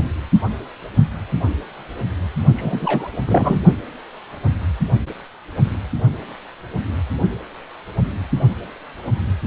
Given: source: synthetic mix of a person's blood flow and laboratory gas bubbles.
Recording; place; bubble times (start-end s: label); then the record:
Doppler ultrasound of blood flow; precordium
2.55-3.08 s: bubbles
3.27-3.59 s: bubbles
From the record:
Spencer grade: 1 (occasional bubble signal discernible with the cardiac motion signal, with majority of cardiac periods free of bubbles); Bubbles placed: only in the low amplitude regions of the cardiac cycle